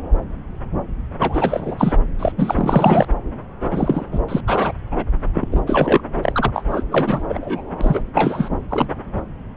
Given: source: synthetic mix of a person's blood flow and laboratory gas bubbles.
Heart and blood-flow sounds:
Doppler ultrasound of blood flow; subclavian vein
1.19-1.92 s: bubbles
2.19-2.32 s: bubbles
2.37-3.06 s: bubbles
3.71-4.06 s: bubbles
4.12-4.20 s: bubbles
4.28-4.41 s: bubbles
4.47-4.73 s: bubbles
4.91-5.04 s: bubbles
5.33-5.49 s: bubbles
5.51-5.62 s: bubbles
5.67-6.02 s: bubbles
6.23-6.50 s: bubbles
6.54-6.62 s: bubbles
6.71-6.83 s: bubbles
6.90-7.23 s: bubbles
7.29-7.62 s: bubbles
7.81-8.03 s: bubbles
8.14-8.49 s: bubbles
8.70-8.87 s: bubbles
From the record:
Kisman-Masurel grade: 333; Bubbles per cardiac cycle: rolling drumbeat, 9 or more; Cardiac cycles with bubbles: 50 to 99%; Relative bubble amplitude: loud (0.450 to 0.775); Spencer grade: 3 (all of the cardiac periods contain showers or single bubble signals, but not dominating or overriding the cardiac motion signals); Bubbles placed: anywhere in the cardiac cycle

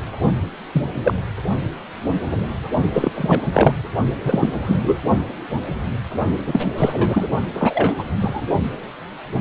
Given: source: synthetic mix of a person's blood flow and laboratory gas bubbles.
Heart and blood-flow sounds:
Doppler ultrasound of blood flow; precordium
0.00-0.02 s: bubbles
0.72-0.82 s: bubbles
1.03-1.14 s: bubbles
2.92-3.10 s: bubbles
3.15-3.41 s: bubbles
3.45-3.75 s: bubbles
4.20-4.64 s: bubbles
4.67-4.77 s: bubbles
4.82-4.96 s: bubbles
6.45-6.74 s: bubbles
6.77-7.28 s: bubbles
7.54-7.96 s: bubbles
7.98-8.03 s: bubbles
8.19-8.42 s: bubbles
From the record:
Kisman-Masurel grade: 233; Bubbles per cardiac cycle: several, 3 to 8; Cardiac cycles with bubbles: 50 to 99%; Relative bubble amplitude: loud (0.450 to 0.775); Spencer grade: 3 (all of the cardiac periods contain showers or single bubble signals, but not dominating or overriding the cardiac motion signals); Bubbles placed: only in the low amplitude regions of the cardiac cycle

